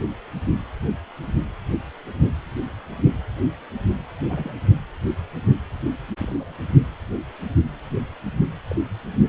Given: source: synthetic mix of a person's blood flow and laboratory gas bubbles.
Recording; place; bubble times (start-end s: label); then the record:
Doppler ultrasound of blood flow; precordium
4.29-4.58 s: bubbles
6.17-6.54 s: bubbles
8.71-8.76 s: bubbles
From the record:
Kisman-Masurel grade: 121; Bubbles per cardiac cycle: 1 to 2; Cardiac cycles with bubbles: 10 to 50%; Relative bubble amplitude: barely perceptible (0.100 to 0.250); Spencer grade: 2 (many but less than half of the cardiac periods contain bubble signals, singularly or in groups); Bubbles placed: only in the low amplitude regions of the cardiac cycle